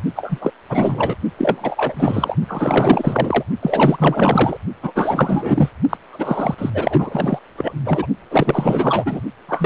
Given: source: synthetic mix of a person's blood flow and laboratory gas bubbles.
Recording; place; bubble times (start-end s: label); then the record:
Doppler ultrasound of blood flow; precordium
0.16-0.39 s: bubbles
0.41-0.52 s: bubbles
0.69-1.17 s: bubbles
1.38-2.35 s: bubbles
2.48-3.44 s: bubbles
3.62-4.57 s: bubbles
4.83-4.92 s: bubbles
4.95-5.69 s: bubbles
5.89-5.97 s: bubbles
6.12-6.54 s: bubbles
6.58-6.70 s: bubbles
6.73-7.39 s: bubbles
7.58-7.72 s: bubbles
7.84-8.07 s: bubbles
8.30-9.22 s: bubbles
9.48-9.66 s: bubbles
From the record:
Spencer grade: 4 (maximum detectable bubble signal sounding continuously throughout systole and diastole of every cardiac period, and overriding the amplitude of the normal cardiac signals); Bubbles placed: only in the low amplitude regions of the cardiac cycle